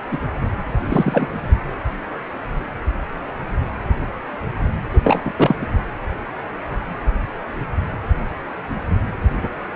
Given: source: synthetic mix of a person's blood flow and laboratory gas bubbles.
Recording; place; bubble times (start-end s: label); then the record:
Doppler ultrasound of blood flow; precordium
0.11-0.19 s: bubbles
0.85-1.36 s: bubbles
4.93-5.00 s: bubbles
5.03-5.21 s: bubbles
5.24-5.33 s: bubbles
5.37-5.55 s: bubbles
5.61-5.67 s: bubbles
From the record:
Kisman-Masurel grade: 223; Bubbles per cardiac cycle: several, 3 to 8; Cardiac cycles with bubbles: 10 to 50%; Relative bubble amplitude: loud (0.450 to 0.775); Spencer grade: 2 (many but less than half of the cardiac periods contain bubble signals, singularly or in groups); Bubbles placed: anywhere in the cardiac cycle